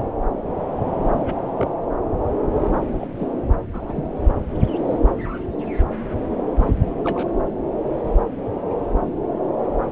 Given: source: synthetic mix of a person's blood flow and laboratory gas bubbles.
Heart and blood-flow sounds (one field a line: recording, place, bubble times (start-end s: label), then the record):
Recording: Doppler ultrasound of blood flow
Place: subclavian vein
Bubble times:
1.20-1.33 s: bubbles
1.58-1.71 s: bubbles
3.00-3.08 s: bubbles
3.19-3.27 s: bubbles
3.73-3.94 s: bubbles
3.96-4.10 s: bubbles
5.89-6.11 s: bubbles
6.57-6.73 s: bubbles
7.04-7.31 s: bubbles
From the record:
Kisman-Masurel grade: 121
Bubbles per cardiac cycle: 1 to 2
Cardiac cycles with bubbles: 10 to 50%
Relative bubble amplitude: barely perceptible (0.100 to 0.250)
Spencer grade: 2 (many but less than half of the cardiac periods contain bubble signals, singularly or in groups)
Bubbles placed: anywhere in the cardiac cycle